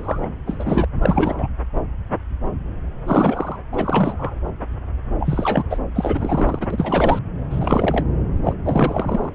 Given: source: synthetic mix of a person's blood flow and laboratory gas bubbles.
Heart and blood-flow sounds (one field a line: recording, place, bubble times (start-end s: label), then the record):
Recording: Doppler ultrasound of blood flow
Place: subclavian vein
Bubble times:
0.00-0.27 s: bubbles
0.47-0.84 s: bubbles
1.02-1.48 s: bubbles
3.06-3.56 s: bubbles
3.72-4.36 s: bubbles
5.18-5.63 s: bubbles
5.70-5.78 s: bubbles
5.95-6.67 s: bubbles
6.70-7.19 s: bubbles
7.50-8.05 s: bubbles
8.44-8.54 s: bubbles
8.64-9.29 s: bubbles
From the record:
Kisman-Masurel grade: 333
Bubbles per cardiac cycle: rolling drumbeat, 9 or more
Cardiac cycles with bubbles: 50 to 99%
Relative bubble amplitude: loud (0.450 to 0.775)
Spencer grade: 3 (all of the cardiac periods contain showers or single bubble signals, but not dominating or overriding the cardiac motion signals)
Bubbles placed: anywhere in the cardiac cycle